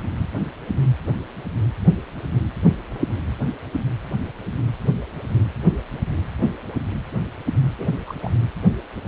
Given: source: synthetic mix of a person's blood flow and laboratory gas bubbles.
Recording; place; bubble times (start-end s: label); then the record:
Doppler ultrasound of blood flow; precordium
7.78-7.88 s: bubbles
8.06-8.14 s: bubbles
8.22-8.31 s: bubbles
From the record:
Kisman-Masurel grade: 211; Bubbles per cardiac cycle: several, 3 to 8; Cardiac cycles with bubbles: 1 to 10%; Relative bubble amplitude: barely perceptible (0.100 to 0.250); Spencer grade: 1 (occasional bubble signal discernible with the cardiac motion signal, with majority of cardiac periods free of bubbles); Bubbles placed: anywhere in the cardiac cycle